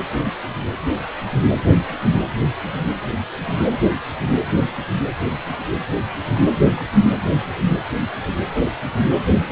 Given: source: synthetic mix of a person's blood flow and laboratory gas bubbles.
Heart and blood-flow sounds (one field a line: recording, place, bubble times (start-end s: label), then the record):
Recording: Doppler ultrasound of blood flow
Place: precordium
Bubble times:
6.76-6.84 s: bubbles
8.53-8.64 s: bubbles
9.32-9.52 s: bubbles
From the record:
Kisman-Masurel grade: 121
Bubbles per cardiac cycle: 1 to 2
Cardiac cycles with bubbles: 10 to 50%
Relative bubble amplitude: barely perceptible (0.100 to 0.250)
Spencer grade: 2 (many but less than half of the cardiac periods contain bubble signals, singularly or in groups)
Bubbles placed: anywhere in the cardiac cycle